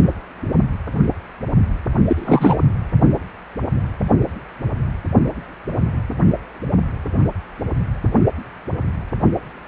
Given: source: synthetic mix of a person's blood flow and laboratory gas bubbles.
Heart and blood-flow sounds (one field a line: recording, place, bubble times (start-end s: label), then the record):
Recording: Doppler ultrasound of blood flow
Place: precordium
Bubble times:
2.06-2.56 s: bubbles
From the record:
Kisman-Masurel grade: 213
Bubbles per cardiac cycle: several, 3 to 8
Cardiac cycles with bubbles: 1 to 10%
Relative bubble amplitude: loud (0.450 to 0.775)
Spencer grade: 1 (occasional bubble signal discernible with the cardiac motion signal, with majority of cardiac periods free of bubbles)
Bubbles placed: only in the low amplitude regions of the cardiac cycle